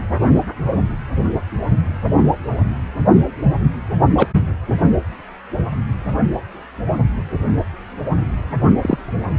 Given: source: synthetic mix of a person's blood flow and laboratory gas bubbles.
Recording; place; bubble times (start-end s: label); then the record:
Doppler ultrasound of blood flow; precordium
4.15-4.26 s: bubbles
8.81-8.98 s: bubbles
From the record:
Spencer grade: 2 (many but less than half of the cardiac periods contain bubble signals, singularly or in groups); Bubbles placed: only in the low amplitude regions of the cardiac cycle